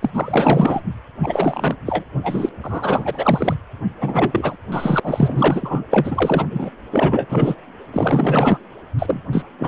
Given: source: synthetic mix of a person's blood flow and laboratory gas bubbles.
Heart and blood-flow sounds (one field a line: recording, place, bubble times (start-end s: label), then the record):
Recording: Doppler ultrasound of blood flow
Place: precordium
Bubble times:
0.00-0.80 s: bubbles
1.23-1.76 s: bubbles
1.86-2.04 s: bubbles
2.23-2.50 s: bubbles
2.62-3.54 s: bubbles
4.00-4.58 s: bubbles
4.71-5.00 s: bubbles
5.03-5.85 s: bubbles
5.90-6.46 s: bubbles
6.50-6.71 s: bubbles
6.91-7.55 s: bubbles
7.93-8.58 s: bubbles
8.98-9.21 s: bubbles
9.32-9.44 s: bubbles
9.59-9.68 s: bubbles
From the record:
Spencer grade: 4 (maximum detectable bubble signal sounding continuously throughout systole and diastole of every cardiac period, and overriding the amplitude of the normal cardiac signals)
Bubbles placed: anywhere in the cardiac cycle